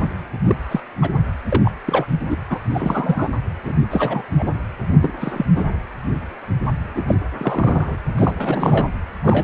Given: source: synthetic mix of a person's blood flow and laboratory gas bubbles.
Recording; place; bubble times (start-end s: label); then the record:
Doppler ultrasound of blood flow; precordium
0.00-0.09 s: bubbles
0.46-0.55 s: bubbles
0.71-0.80 s: bubbles
1.01-1.10 s: bubbles
1.52-1.71 s: bubbles
1.86-2.06 s: bubbles
2.29-2.37 s: bubbles
2.50-2.60 s: bubbles
2.74-3.30 s: bubbles
3.65-3.73 s: bubbles
3.91-4.24 s: bubbles
4.37-4.51 s: bubbles
5.01-5.12 s: bubbles
5.20-5.46 s: bubbles
5.55-5.64 s: bubbles
6.96-7.02 s: bubbles
7.07-7.14 s: bubbles
7.38-7.96 s: bubbles
8.15-8.88 s: bubbles
9.23-9.44 s: bubbles
From the record:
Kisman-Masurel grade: 232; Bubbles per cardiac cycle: several, 3 to 8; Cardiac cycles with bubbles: 50 to 99%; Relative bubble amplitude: moderate (0.250 to 0.450); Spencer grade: 3 (all of the cardiac periods contain showers or single bubble signals, but not dominating or overriding the cardiac motion signals); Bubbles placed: anywhere in the cardiac cycle